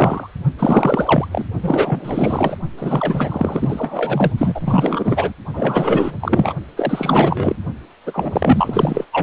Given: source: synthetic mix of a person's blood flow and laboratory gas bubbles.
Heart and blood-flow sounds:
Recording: Doppler ultrasound of blood flow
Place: precordium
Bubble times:
0.00-0.29 s: bubbles
0.58-1.27 s: bubbles
1.31-1.45 s: bubbles
1.62-2.58 s: bubbles
2.77-4.31 s: bubbles
4.38-5.32 s: bubbles
5.53-6.15 s: bubbles
6.20-6.53 s: bubbles
6.76-7.55 s: bubbles
8.05-9.05 s: bubbles
9.12-9.23 s: bubbles
From the record:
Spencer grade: 4 (maximum detectable bubble signal sounding continuously throughout systole and diastole of every cardiac period, and overriding the amplitude of the normal cardiac signals)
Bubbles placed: only in the low amplitude regions of the cardiac cycle

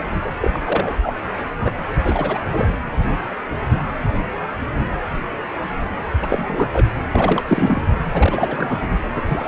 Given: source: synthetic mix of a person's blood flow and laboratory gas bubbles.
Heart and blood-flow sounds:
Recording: Doppler ultrasound of blood flow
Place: precordium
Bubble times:
0.22-0.31 s: bubbles
0.40-0.60 s: bubbles
0.64-0.95 s: bubbles
1.02-1.12 s: bubbles
1.60-1.71 s: bubbles
2.02-2.39 s: bubbles
2.50-2.67 s: bubbles
6.22-6.68 s: bubbles
6.73-6.87 s: bubbles
7.12-7.44 s: bubbles
7.48-7.81 s: bubbles
8.13-8.87 s: bubbles
9.16-9.48 s: bubbles
From the record:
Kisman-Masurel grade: 232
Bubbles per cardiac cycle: several, 3 to 8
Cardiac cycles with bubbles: 50 to 99%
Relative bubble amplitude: moderate (0.250 to 0.450)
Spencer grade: 3 (all of the cardiac periods contain showers or single bubble signals, but not dominating or overriding the cardiac motion signals)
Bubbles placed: anywhere in the cardiac cycle

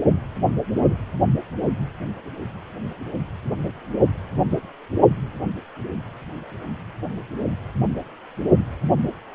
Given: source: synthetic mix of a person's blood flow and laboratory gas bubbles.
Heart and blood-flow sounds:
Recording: Doppler ultrasound of blood flow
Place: precordium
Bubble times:
0.75-0.96 s: bubbles
From the record:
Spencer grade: 2 (many but less than half of the cardiac periods contain bubble signals, singularly or in groups)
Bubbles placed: only in the low amplitude regions of the cardiac cycle

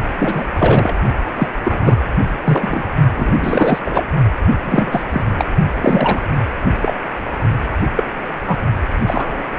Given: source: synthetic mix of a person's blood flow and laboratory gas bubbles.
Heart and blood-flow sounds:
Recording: Doppler ultrasound of blood flow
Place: precordium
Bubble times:
0.18-0.47 s: bubbles
0.58-0.94 s: bubbles
1.36-1.48 s: bubbles
1.64-1.97 s: bubbles
2.43-2.91 s: bubbles
3.17-3.79 s: bubbles
3.84-4.04 s: bubbles
4.64-5.05 s: bubbles
5.11-5.24 s: bubbles
5.38-5.46 s: bubbles
5.81-6.27 s: bubbles
6.82-6.94 s: bubbles
7.95-8.04 s: bubbles
8.47-8.56 s: bubbles
9.06-9.43 s: bubbles
9.57-9.59 s: bubbles
From the record:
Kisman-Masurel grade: 243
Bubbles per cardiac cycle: several, 3 to 8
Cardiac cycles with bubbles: 100%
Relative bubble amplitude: loud (0.450 to 0.775)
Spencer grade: 3 (all of the cardiac periods contain showers or single bubble signals, but not dominating or overriding the cardiac motion signals)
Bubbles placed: only in the low amplitude regions of the cardiac cycle

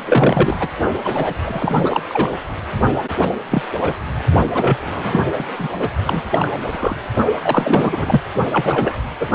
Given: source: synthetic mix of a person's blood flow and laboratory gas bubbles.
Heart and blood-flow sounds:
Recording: Doppler ultrasound of blood flow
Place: precordium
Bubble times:
0.06-0.56 s: bubbles
0.59-0.68 s: bubbles
1.04-1.34 s: bubbles
1.44-2.00 s: bubbles
2.08-2.31 s: bubbles
3.21-3.29 s: bubbles
3.52-3.62 s: bubbles
3.79-3.94 s: bubbles
4.54-4.77 s: bubbles
4.86-5.26 s: bubbles
5.36-5.46 s: bubbles
5.59-5.69 s: bubbles
5.79-5.88 s: bubbles
6.05-6.21 s: bubbles
6.32-6.57 s: bubbles
6.66-6.97 s: bubbles
7.42-8.21 s: bubbles
8.52-8.97 s: bubbles
9.20-9.26 s: bubbles
From the record:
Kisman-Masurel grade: 243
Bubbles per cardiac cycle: several, 3 to 8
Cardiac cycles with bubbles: 100%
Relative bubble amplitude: loud (0.450 to 0.775)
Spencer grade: 3 (all of the cardiac periods contain showers or single bubble signals, but not dominating or overriding the cardiac motion signals)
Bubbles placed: only in the low amplitude regions of the cardiac cycle

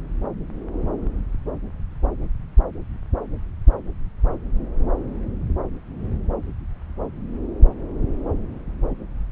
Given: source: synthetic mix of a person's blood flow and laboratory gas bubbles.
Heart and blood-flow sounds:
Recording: Doppler ultrasound of blood flow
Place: subclavian vein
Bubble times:
no bubbles
From the record:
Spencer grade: 0 (complete lack of bubble signals)

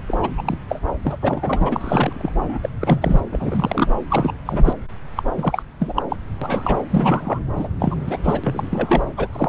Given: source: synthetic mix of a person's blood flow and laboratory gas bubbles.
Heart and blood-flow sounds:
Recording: Doppler ultrasound of blood flow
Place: subclavian vein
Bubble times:
0.07-0.17 s: bubbles
0.22-0.30 s: bubbles
0.37-0.43 s: bubbles
0.45-0.57 s: bubbles
0.69-0.80 s: bubbles
0.88-0.91 s: bubbles
1.03-1.16 s: bubbles
1.21-2.30 s: bubbles
2.49-2.58 s: bubbles
2.62-2.70 s: bubbles
2.81-3.21 s: bubbles
3.31-3.88 s: bubbles
4.09-4.33 s: bubbles
4.45-4.73 s: bubbles
5.17-5.22 s: bubbles
5.37-5.62 s: bubbles
5.79-5.93 s: bubbles
5.96-6.02 s: bubbles
6.09-6.16 s: bubbles
6.42-6.79 s: bubbles
6.90-7.39 s: bubbles
7.56-7.68 s: bubbles
7.79-7.95 s: bubbles
8.07-8.18 s: bubbles
8.23-8.41 s: bubbles
8.44-9.05 s: bubbles
9.17-9.28 s: bubbles
9.33-9.49 s: bubbles
From the record:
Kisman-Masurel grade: 342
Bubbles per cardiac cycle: rolling drumbeat, 9 or more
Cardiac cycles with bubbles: 100%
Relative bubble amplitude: moderate (0.250 to 0.450)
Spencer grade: 3 (all of the cardiac periods contain showers or single bubble signals, but not dominating or overriding the cardiac motion signals)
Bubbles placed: anywhere in the cardiac cycle

